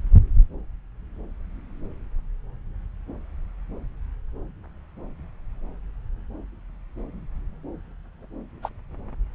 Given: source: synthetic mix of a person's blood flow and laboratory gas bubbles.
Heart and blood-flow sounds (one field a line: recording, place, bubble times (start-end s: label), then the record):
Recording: Doppler ultrasound of blood flow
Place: subclavian vein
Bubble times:
8.62-8.69 s: bubbles
From the record:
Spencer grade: 1 (occasional bubble signal discernible with the cardiac motion signal, with majority of cardiac periods free of bubbles)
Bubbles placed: anywhere in the cardiac cycle